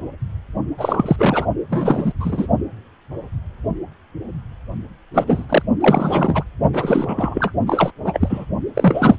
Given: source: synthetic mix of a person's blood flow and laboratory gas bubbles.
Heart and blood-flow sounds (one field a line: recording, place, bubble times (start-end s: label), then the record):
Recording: Doppler ultrasound of blood flow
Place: precordium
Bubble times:
0.77-1.16 s: bubbles
1.19-1.47 s: bubbles
1.69-2.12 s: bubbles
2.19-2.48 s: bubbles
5.13-5.45 s: bubbles
5.49-5.62 s: bubbles
5.81-6.44 s: bubbles
6.73-7.52 s: bubbles
7.67-7.92 s: bubbles
8.04-8.45 s: bubbles
8.75-9.19 s: bubbles
From the record:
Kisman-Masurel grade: 333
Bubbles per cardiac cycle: rolling drumbeat, 9 or more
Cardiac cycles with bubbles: 50 to 99%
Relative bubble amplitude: loud (0.450 to 0.775)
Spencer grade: 3 (all of the cardiac periods contain showers or single bubble signals, but not dominating or overriding the cardiac motion signals)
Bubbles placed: only in the low amplitude regions of the cardiac cycle